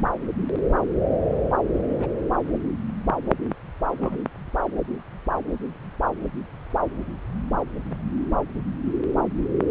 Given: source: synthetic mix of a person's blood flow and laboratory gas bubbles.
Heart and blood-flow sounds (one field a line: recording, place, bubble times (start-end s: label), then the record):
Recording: Doppler ultrasound of blood flow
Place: subclavian vein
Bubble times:
1.98-2.07 s: bubbles
4.00-4.17 s: bubbles
7.90-7.95 s: bubbles
From the record:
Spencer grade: 2 (many but less than half of the cardiac periods contain bubble signals, singularly or in groups)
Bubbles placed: anywhere in the cardiac cycle